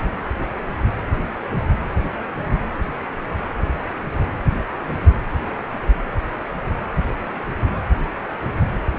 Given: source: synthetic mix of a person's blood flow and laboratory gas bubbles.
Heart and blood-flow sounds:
Doppler ultrasound of blood flow; precordium
0.40-0.45 s: bubbles
From the record:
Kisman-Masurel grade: 112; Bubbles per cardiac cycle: 1 to 2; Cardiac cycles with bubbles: 1 to 10%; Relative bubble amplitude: moderate (0.250 to 0.450); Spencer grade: 1 (occasional bubble signal discernible with the cardiac motion signal, with majority of cardiac periods free of bubbles); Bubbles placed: anywhere in the cardiac cycle

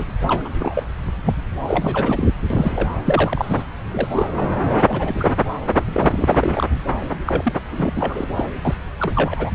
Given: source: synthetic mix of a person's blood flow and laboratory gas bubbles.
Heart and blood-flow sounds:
Doppler ultrasound of blood flow; subclavian vein
0.00-0.04 s: bubbles
0.28-0.49 s: bubbles
0.58-0.83 s: bubbles
1.08-1.11 s: bubbles
1.25-1.35 s: bubbles
1.69-2.31 s: bubbles
2.50-2.89 s: bubbles
3.06-3.64 s: bubbles
3.86-3.88 s: bubbles
3.91-4.29 s: bubbles
4.73-5.31 s: bubbles
5.85-6.67 s: bubbles
7.26-7.52 s: bubbles
7.70-7.93 s: bubbles
7.96-8.27 s: bubbles
8.36-8.46 s: bubbles
8.63-8.77 s: bubbles
8.99-9.12 s: bubbles
9.15-9.52 s: bubbles
From the record:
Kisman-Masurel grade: 242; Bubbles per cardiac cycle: several, 3 to 8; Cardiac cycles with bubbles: 100%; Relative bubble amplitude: moderate (0.250 to 0.450); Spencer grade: 3 (all of the cardiac periods contain showers or single bubble signals, but not dominating or overriding the cardiac motion signals); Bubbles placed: anywhere in the cardiac cycle

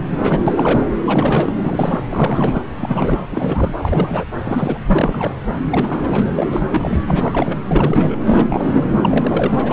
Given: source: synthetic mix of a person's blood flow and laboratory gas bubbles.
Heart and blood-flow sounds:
Doppler ultrasound of blood flow; subclavian vein
0.00-0.05 s: bubbles
0.10-0.42 s: bubbles
0.46-0.87 s: bubbles
1.04-1.51 s: bubbles
1.58-2.06 s: bubbles
2.09-2.60 s: bubbles
2.81-3.19 s: bubbles
3.26-3.76 s: bubbles
3.82-4.24 s: bubbles
4.37-4.79 s: bubbles
4.88-5.36 s: bubbles
5.69-7.02 s: bubbles
7.07-7.57 s: bubbles
7.65-8.16 s: bubbles
8.25-8.45 s: bubbles
8.49-8.88 s: bubbles
8.94-9.73 s: bubbles
From the record:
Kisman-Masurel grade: 342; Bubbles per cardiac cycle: rolling drumbeat, 9 or more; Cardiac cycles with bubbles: 100%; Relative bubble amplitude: moderate (0.250 to 0.450); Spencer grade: 3 (all of the cardiac periods contain showers or single bubble signals, but not dominating or overriding the cardiac motion signals); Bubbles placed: anywhere in the cardiac cycle

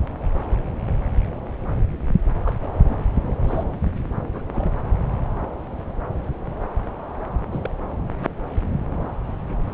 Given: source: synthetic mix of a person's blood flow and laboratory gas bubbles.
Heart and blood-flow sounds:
Doppler ultrasound of blood flow; subclavian vein
2.43-2.56 s: bubbles
2.62-2.68 s: bubbles
2.70-3.06 s: bubbles
3.47-3.64 s: bubbles
3.70-3.79 s: bubbles
4.33-4.42 s: bubbles
4.53-4.72 s: bubbles
7.51-7.70 s: bubbles
From the record:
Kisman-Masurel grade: 221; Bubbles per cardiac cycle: several, 3 to 8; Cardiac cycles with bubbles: 10 to 50%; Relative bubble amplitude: barely perceptible (0.100 to 0.250); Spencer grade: 2 (many but less than half of the cardiac periods contain bubble signals, singularly or in groups); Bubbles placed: anywhere in the cardiac cycle

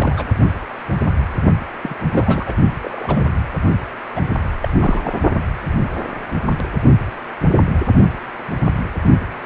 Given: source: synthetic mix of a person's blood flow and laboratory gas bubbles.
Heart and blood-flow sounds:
Doppler ultrasound of blood flow; precordium
0.00-0.24 s: bubbles
1.82-1.96 s: bubbles
2.10-2.54 s: bubbles
2.81-3.24 s: bubbles
4.16-4.21 s: bubbles
4.62-4.73 s: bubbles
4.80-5.15 s: bubbles
From the record:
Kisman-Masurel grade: 222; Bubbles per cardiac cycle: several, 3 to 8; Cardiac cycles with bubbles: 10 to 50%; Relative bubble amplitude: moderate (0.250 to 0.450); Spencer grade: 2 (many but less than half of the cardiac periods contain bubble signals, singularly or in groups); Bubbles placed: only in the low amplitude regions of the cardiac cycle

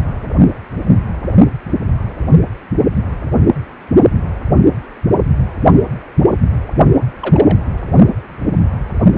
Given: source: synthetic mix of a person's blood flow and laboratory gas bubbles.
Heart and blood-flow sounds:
Doppler ultrasound of blood flow; precordium
7.22-7.58 s: bubbles
From the record:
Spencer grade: 1 (occasional bubble signal discernible with the cardiac motion signal, with majority of cardiac periods free of bubbles); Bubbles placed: only in the low amplitude regions of the cardiac cycle

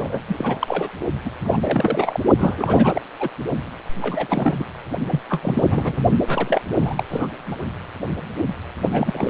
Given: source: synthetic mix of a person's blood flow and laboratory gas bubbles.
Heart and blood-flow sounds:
Doppler ultrasound of blood flow; precordium
0.01-0.20 s: bubbles
0.27-0.89 s: bubbles
1.25-1.29 s: bubbles
1.44-1.58 s: bubbles
1.62-2.20 s: bubbles
2.38-3.02 s: bubbles
3.20-3.29 s: bubbles
4.01-4.64 s: bubbles
5.10-5.21 s: bubbles
5.29-6.01 s: bubbles
6.27-6.61 s: bubbles
6.78-7.04 s: bubbles
7.08-7.28 s: bubbles
7.46-7.56 s: bubbles
8.91-9.30 s: bubbles
From the record:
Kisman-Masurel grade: 332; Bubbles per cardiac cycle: rolling drumbeat, 9 or more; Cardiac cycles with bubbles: 50 to 99%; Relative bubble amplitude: moderate (0.250 to 0.450); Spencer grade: 3 (all of the cardiac periods contain showers or single bubble signals, but not dominating or overriding the cardiac motion signals); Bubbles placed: only in the low amplitude regions of the cardiac cycle

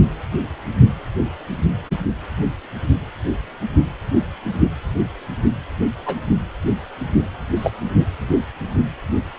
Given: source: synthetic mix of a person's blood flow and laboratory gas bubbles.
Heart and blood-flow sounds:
Doppler ultrasound of blood flow; precordium
0.33-0.40 s: bubbles
6.04-6.21 s: bubbles
7.55-7.71 s: bubbles
From the record:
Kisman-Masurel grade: 122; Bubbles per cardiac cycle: 1 to 2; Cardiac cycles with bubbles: 10 to 50%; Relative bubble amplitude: moderate (0.250 to 0.450); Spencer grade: 2 (many but less than half of the cardiac periods contain bubble signals, singularly or in groups); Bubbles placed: anywhere in the cardiac cycle

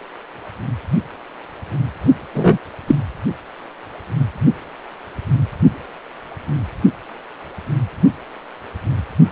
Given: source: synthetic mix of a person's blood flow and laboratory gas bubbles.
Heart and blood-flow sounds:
Doppler ultrasound of blood flow; precordium
2.34-2.58 s: bubbles
2.87-2.95 s: bubbles
From the record:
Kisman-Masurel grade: 113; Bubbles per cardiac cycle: 1 to 2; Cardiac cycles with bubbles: 1 to 10%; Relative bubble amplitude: loud (0.450 to 0.775); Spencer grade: 1 (occasional bubble signal discernible with the cardiac motion signal, with majority of cardiac periods free of bubbles); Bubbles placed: only in the low amplitude regions of the cardiac cycle

